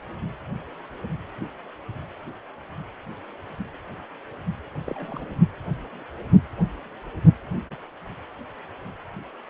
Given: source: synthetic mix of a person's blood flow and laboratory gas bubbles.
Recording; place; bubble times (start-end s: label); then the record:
Doppler ultrasound of blood flow; precordium
4.85-5.25 s: bubbles
From the record:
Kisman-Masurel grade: 211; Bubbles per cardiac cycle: several, 3 to 8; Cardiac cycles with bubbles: 1 to 10%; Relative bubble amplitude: barely perceptible (0.100 to 0.250); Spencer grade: 1 (occasional bubble signal discernible with the cardiac motion signal, with majority of cardiac periods free of bubbles); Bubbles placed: anywhere in the cardiac cycle